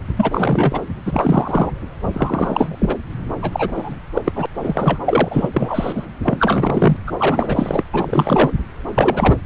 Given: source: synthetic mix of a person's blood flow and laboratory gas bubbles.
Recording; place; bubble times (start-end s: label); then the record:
Doppler ultrasound of blood flow; subclavian vein
0.17-0.81 s: bubbles
1.05-1.72 s: bubbles
2.12-2.96 s: bubbles
3.42-3.71 s: bubbles
3.75-3.96 s: bubbles
4.13-4.22 s: bubbles
4.25-4.31 s: bubbles
4.35-4.46 s: bubbles
4.60-4.99 s: bubbles
5.05-5.49 s: bubbles
5.54-6.05 s: bubbles
6.23-6.97 s: bubbles
7.06-7.12 s: bubbles
7.18-7.84 s: bubbles
7.92-8.52 s: bubbles
8.96-9.38 s: bubbles
From the record:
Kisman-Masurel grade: 343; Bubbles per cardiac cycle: rolling drumbeat, 9 or more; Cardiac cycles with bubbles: 100%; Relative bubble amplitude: loud (0.450 to 0.775); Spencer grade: 3 (all of the cardiac periods contain showers or single bubble signals, but not dominating or overriding the cardiac motion signals); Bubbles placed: anywhere in the cardiac cycle